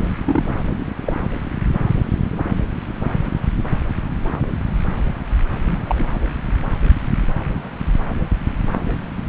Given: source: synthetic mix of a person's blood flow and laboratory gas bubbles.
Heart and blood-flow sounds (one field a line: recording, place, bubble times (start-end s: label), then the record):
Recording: Doppler ultrasound of blood flow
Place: subclavian vein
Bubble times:
0.24-0.44 s: bubbles
1.06-1.13 s: bubbles
5.67-6.13 s: bubbles
From the record:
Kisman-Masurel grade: 122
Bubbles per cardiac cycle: 1 to 2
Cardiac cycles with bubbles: 10 to 50%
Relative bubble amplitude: moderate (0.250 to 0.450)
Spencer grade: 2 (many but less than half of the cardiac periods contain bubble signals, singularly or in groups)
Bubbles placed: anywhere in the cardiac cycle